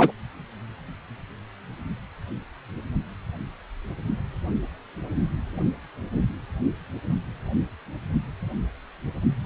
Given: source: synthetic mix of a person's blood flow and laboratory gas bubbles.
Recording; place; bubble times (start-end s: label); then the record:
Doppler ultrasound of blood flow; precordium
0.00-0.12 s: bubbles
From the record:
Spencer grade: 1 (occasional bubble signal discernible with the cardiac motion signal, with majority of cardiac periods free of bubbles); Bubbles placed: only in the low amplitude regions of the cardiac cycle